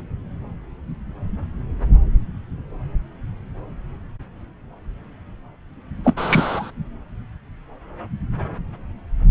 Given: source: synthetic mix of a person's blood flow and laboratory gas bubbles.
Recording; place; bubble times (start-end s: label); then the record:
Doppler ultrasound of blood flow; subclavian vein
6.04-6.13 s: bubbles
6.17-6.71 s: bubbles
From the record:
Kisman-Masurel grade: 213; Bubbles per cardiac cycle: several, 3 to 8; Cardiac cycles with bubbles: 1 to 10%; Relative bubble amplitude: loud (0.450 to 0.775); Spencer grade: 1 (occasional bubble signal discernible with the cardiac motion signal, with majority of cardiac periods free of bubbles); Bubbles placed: anywhere in the cardiac cycle